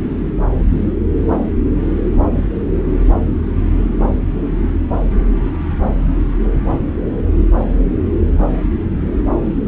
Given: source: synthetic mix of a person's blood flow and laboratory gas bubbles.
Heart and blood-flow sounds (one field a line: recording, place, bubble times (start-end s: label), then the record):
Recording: Doppler ultrasound of blood flow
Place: subclavian vein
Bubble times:
no bubbles
From the record:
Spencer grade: 0 (complete lack of bubble signals)